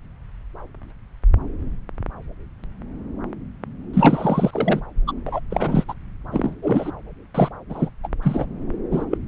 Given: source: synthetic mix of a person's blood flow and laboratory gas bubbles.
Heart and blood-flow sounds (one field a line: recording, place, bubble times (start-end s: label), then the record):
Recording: Doppler ultrasound of blood flow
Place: subclavian vein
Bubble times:
3.93-4.80 s: bubbles
5.07-5.12 s: bubbles
5.26-5.40 s: bubbles
5.50-5.84 s: bubbles
5.88-5.94 s: bubbles
6.31-6.55 s: bubbles
6.62-6.92 s: bubbles
7.34-7.49 s: bubbles
7.69-7.89 s: bubbles
8.03-8.08 s: bubbles
8.22-8.46 s: bubbles
8.91-9.06 s: bubbles
9.11-9.18 s: bubbles
From the record:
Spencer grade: 3 (all of the cardiac periods contain showers or single bubble signals, but not dominating or overriding the cardiac motion signals)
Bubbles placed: anywhere in the cardiac cycle